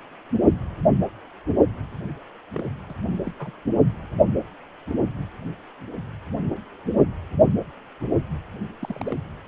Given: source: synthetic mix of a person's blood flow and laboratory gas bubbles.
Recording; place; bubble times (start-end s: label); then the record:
Doppler ultrasound of blood flow; precordium
2.52-2.68 s: bubbles
2.88-2.94 s: bubbles
3.25-3.31 s: bubbles
3.39-3.51 s: bubbles
8.83-9.18 s: bubbles
From the record:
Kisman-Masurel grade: 121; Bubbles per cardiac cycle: 1 to 2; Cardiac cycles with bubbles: 10 to 50%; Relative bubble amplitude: barely perceptible (0.100 to 0.250); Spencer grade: 2 (many but less than half of the cardiac periods contain bubble signals, singularly or in groups); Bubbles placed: only in the low amplitude regions of the cardiac cycle